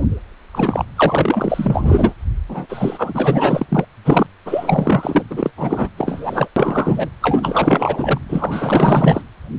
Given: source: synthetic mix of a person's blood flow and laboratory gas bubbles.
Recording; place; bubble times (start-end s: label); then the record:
Doppler ultrasound of blood flow; precordium
0.53-0.85 s: bubbles
0.96-2.14 s: bubbles
2.48-2.66 s: bubbles
2.69-3.66 s: bubbles
3.69-3.85 s: bubbles
4.04-4.26 s: bubbles
4.45-5.23 s: bubbles
5.30-5.50 s: bubbles
5.56-5.89 s: bubbles
5.97-6.48 s: bubbles
6.56-7.09 s: bubbles
7.20-8.21 s: bubbles
8.29-9.21 s: bubbles
From the record:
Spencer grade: 4 (maximum detectable bubble signal sounding continuously throughout systole and diastole of every cardiac period, and overriding the amplitude of the normal cardiac signals); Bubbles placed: anywhere in the cardiac cycle